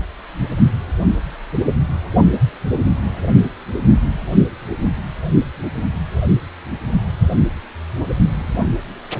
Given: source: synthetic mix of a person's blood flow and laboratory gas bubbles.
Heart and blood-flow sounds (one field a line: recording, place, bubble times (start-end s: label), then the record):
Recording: Doppler ultrasound of blood flow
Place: precordium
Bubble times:
8.38-8.67 s: bubbles
From the record:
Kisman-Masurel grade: 111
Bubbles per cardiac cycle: 1 to 2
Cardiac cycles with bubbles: 1 to 10%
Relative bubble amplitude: barely perceptible (0.100 to 0.250)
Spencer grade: 1 (occasional bubble signal discernible with the cardiac motion signal, with majority of cardiac periods free of bubbles)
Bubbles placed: only in the low amplitude regions of the cardiac cycle